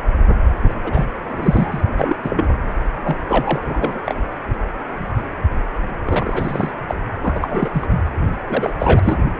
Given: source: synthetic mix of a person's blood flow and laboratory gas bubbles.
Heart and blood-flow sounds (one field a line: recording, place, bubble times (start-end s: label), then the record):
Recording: Doppler ultrasound of blood flow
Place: precordium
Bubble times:
0.69-0.74 s: bubbles
0.83-1.05 s: bubbles
1.28-1.85 s: bubbles
1.96-2.16 s: bubbles
2.23-2.60 s: bubbles
3.02-3.17 s: bubbles
3.28-4.00 s: bubbles
4.05-4.16 s: bubbles
6.05-6.71 s: bubbles
6.88-6.95 s: bubbles
7.24-7.69 s: bubbles
7.73-7.86 s: bubbles
8.47-8.72 s: bubbles
8.78-8.99 s: bubbles
9.02-9.31 s: bubbles
9.38-9.40 s: bubbles
From the record:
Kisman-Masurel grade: 332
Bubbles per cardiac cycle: rolling drumbeat, 9 or more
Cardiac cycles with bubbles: 50 to 99%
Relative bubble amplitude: moderate (0.250 to 0.450)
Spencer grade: 3 (all of the cardiac periods contain showers or single bubble signals, but not dominating or overriding the cardiac motion signals)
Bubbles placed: anywhere in the cardiac cycle